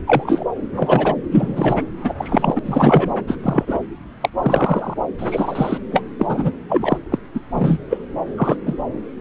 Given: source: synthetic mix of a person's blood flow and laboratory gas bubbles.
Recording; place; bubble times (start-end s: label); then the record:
Doppler ultrasound of blood flow; subclavian vein
0.07-0.44 s: bubbles
0.76-1.15 s: bubbles
1.31-1.83 s: bubbles
2.04-2.14 s: bubbles
2.17-2.60 s: bubbles
2.65-3.12 s: bubbles
3.27-3.36 s: bubbles
3.43-3.79 s: bubbles
4.21-4.29 s: bubbles
4.42-4.94 s: bubbles
5.18-5.78 s: bubbles
5.92-6.02 s: bubbles
6.18-6.52 s: bubbles
6.69-6.97 s: bubbles
7.11-7.18 s: bubbles
7.33-7.41 s: bubbles
7.51-7.78 s: bubbles
7.90-7.98 s: bubbles
8.36-8.56 s: bubbles
8.66-8.75 s: bubbles
From the record:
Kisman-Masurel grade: 233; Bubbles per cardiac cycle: several, 3 to 8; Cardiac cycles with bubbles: 50 to 99%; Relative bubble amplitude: loud (0.450 to 0.775); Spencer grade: 3 (all of the cardiac periods contain showers or single bubble signals, but not dominating or overriding the cardiac motion signals); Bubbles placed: anywhere in the cardiac cycle